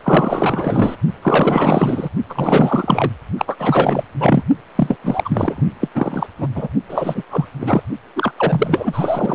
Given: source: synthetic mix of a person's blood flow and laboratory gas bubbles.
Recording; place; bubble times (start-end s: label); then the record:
Doppler ultrasound of blood flow; precordium
0.03-0.96 s: bubbles
1.22-2.09 s: bubbles
2.29-3.12 s: bubbles
3.37-4.04 s: bubbles
4.19-4.43 s: bubbles
4.75-4.96 s: bubbles
5.02-5.62 s: bubbles
5.80-5.88 s: bubbles
5.95-6.26 s: bubbles
6.38-6.47 s: bubbles
6.55-6.68 s: bubbles
6.88-7.23 s: bubbles
7.30-7.46 s: bubbles
7.59-7.83 s: bubbles
8.16-8.32 s: bubbles
8.38-9.35 s: bubbles
From the record:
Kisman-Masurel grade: 444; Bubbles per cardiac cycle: continuous sound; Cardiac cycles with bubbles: 100%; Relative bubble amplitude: maximal (0.775 to 0.999); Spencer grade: 4 (maximum detectable bubble signal sounding continuously throughout systole and diastole of every cardiac period, and overriding the amplitude of the normal cardiac signals); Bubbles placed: only in the low amplitude regions of the cardiac cycle